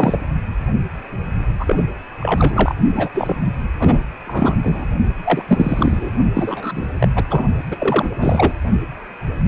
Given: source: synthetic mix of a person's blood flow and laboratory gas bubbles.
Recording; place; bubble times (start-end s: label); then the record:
Doppler ultrasound of blood flow; precordium
0.00-0.17 s: bubbles
1.59-1.83 s: bubbles
2.19-2.75 s: bubbles
2.94-3.09 s: bubbles
3.13-3.36 s: bubbles
3.79-4.03 s: bubbles
4.27-4.56 s: bubbles
4.63-4.85 s: bubbles
5.24-5.42 s: bubbles
5.47-6.11 s: bubbles
6.34-6.88 s: bubbles
7.00-7.08 s: bubbles
7.15-7.24 s: bubbles
7.29-7.45 s: bubbles
7.71-7.75 s: bubbles
7.79-8.16 s: bubbles
8.19-8.54 s: bubbles
From the record:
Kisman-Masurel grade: 332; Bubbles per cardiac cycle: rolling drumbeat, 9 or more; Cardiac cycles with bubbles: 50 to 99%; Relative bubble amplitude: moderate (0.250 to 0.450); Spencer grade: 3 (all of the cardiac periods contain showers or single bubble signals, but not dominating or overriding the cardiac motion signals); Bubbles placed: only in the low amplitude regions of the cardiac cycle